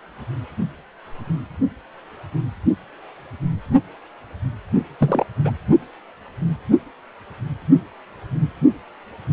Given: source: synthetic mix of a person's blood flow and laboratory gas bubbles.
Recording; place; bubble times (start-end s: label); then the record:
Doppler ultrasound of blood flow; precordium
4.99-5.25 s: bubbles
5.44-5.53 s: bubbles
From the record:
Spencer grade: 1 (occasional bubble signal discernible with the cardiac motion signal, with majority of cardiac periods free of bubbles); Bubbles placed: only in the low amplitude regions of the cardiac cycle